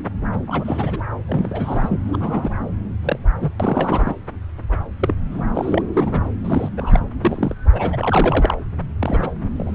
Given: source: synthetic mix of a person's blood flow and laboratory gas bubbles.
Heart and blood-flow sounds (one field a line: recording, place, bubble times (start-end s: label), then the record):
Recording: Doppler ultrasound of blood flow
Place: subclavian vein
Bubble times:
0.47-1.00 s: bubbles
1.27-2.50 s: bubbles
3.03-3.19 s: bubbles
3.40-3.51 s: bubbles
3.59-4.15 s: bubbles
5.00-5.15 s: bubbles
5.31-5.42 s: bubbles
5.54-5.83 s: bubbles
5.93-6.29 s: bubbles
6.45-6.70 s: bubbles
6.77-7.00 s: bubbles
7.22-7.55 s: bubbles
7.72-8.55 s: bubbles
8.99-9.33 s: bubbles
9.56-9.75 s: bubbles
From the record:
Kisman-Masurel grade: 242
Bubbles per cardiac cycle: several, 3 to 8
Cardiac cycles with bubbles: 100%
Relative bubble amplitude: moderate (0.250 to 0.450)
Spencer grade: 3 (all of the cardiac periods contain showers or single bubble signals, but not dominating or overriding the cardiac motion signals)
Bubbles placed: anywhere in the cardiac cycle